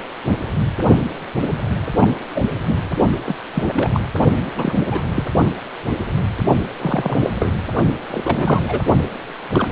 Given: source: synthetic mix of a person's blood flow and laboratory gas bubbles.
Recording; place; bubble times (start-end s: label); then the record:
Doppler ultrasound of blood flow; precordium
1.97-2.13 s: bubbles
2.34-2.43 s: bubbles
2.67-2.75 s: bubbles
3.26-3.35 s: bubbles
3.54-3.90 s: bubbles
3.93-4.03 s: bubbles
4.57-4.85 s: bubbles
4.89-5.02 s: bubbles
5.15-5.24 s: bubbles
6.81-7.30 s: bubbles
7.39-7.53 s: bubbles
8.11-8.81 s: bubbles
9.53-9.68 s: bubbles
From the record:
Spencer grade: 3 (all of the cardiac periods contain showers or single bubble signals, but not dominating or overriding the cardiac motion signals); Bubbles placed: only in the low amplitude regions of the cardiac cycle